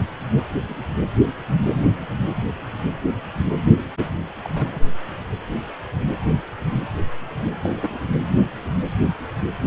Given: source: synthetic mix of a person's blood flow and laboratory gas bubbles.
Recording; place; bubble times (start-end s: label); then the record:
Doppler ultrasound of blood flow; precordium
0.69-0.84 s: bubbles
4.44-4.81 s: bubbles
7.63-7.98 s: bubbles
From the record:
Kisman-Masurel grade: 121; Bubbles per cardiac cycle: 1 to 2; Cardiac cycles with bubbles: 10 to 50%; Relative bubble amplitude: barely perceptible (0.100 to 0.250); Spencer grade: 2 (many but less than half of the cardiac periods contain bubble signals, singularly or in groups); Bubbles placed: anywhere in the cardiac cycle